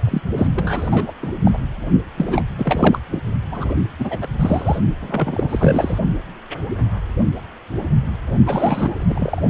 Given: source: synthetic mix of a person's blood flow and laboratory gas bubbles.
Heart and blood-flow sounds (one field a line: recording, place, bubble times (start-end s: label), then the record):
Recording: Doppler ultrasound of blood flow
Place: precordium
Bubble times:
0.04-0.21 s: bubbles
0.36-0.50 s: bubbles
0.54-1.12 s: bubbles
1.22-1.33 s: bubbles
1.45-1.58 s: bubbles
2.18-2.43 s: bubbles
2.58-2.99 s: bubbles
3.11-3.18 s: bubbles
3.51-3.75 s: bubbles
3.99-4.28 s: bubbles
4.39-4.79 s: bubbles
5.00-5.99 s: bubbles
8.46-9.42 s: bubbles
From the record:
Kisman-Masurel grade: 333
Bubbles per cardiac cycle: rolling drumbeat, 9 or more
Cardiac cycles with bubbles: 50 to 99%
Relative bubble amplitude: loud (0.450 to 0.775)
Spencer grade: 3 (all of the cardiac periods contain showers or single bubble signals, but not dominating or overriding the cardiac motion signals)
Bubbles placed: only in the low amplitude regions of the cardiac cycle